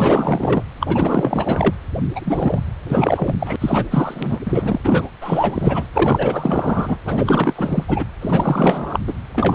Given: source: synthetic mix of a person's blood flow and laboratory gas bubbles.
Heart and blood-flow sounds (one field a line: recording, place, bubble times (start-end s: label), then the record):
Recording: Doppler ultrasound of blood flow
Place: precordium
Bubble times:
0.00-0.62 s: bubbles
0.79-1.74 s: bubbles
2.15-2.60 s: bubbles
2.85-3.35 s: bubbles
3.39-3.56 s: bubbles
3.60-3.86 s: bubbles
3.91-4.38 s: bubbles
4.45-4.78 s: bubbles
4.83-5.08 s: bubbles
5.21-5.87 s: bubbles
5.94-6.97 s: bubbles
7.04-7.84 s: bubbles
7.88-8.05 s: bubbles
8.21-8.99 s: bubbles
9.07-9.13 s: bubbles
9.32-9.55 s: bubbles
From the record:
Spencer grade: 4 (maximum detectable bubble signal sounding continuously throughout systole and diastole of every cardiac period, and overriding the amplitude of the normal cardiac signals)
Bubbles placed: anywhere in the cardiac cycle